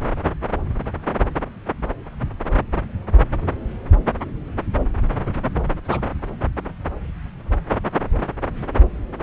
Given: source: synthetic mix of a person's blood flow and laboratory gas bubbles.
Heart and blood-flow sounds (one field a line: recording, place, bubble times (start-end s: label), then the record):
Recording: Doppler ultrasound of blood flow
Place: subclavian vein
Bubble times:
5.91-6.00 s: bubbles
From the record:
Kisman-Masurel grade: 111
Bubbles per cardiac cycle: 1 to 2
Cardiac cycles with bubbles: 1 to 10%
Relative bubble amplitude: barely perceptible (0.100 to 0.250)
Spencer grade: 1 (occasional bubble signal discernible with the cardiac motion signal, with majority of cardiac periods free of bubbles)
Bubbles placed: anywhere in the cardiac cycle